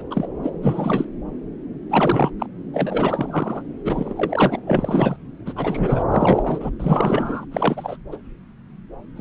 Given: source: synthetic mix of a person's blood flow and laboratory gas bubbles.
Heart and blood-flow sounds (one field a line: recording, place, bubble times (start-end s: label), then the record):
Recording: Doppler ultrasound of blood flow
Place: subclavian vein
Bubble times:
0.11-0.28 s: bubbles
0.43-0.52 s: bubbles
0.62-1.05 s: bubbles
1.90-2.30 s: bubbles
2.39-2.46 s: bubbles
2.73-3.62 s: bubbles
3.84-4.13 s: bubbles
4.16-4.59 s: bubbles
4.67-5.17 s: bubbles
5.46-5.53 s: bubbles
5.55-6.04 s: bubbles
6.11-6.70 s: bubbles
6.79-7.45 s: bubbles
7.51-7.96 s: bubbles
8.12-8.16 s: bubbles
9.16-9.21 s: bubbles
From the record:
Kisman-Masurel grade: 332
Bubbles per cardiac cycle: rolling drumbeat, 9 or more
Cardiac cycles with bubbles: 50 to 99%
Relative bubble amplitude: moderate (0.250 to 0.450)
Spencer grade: 3 (all of the cardiac periods contain showers or single bubble signals, but not dominating or overriding the cardiac motion signals)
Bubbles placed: anywhere in the cardiac cycle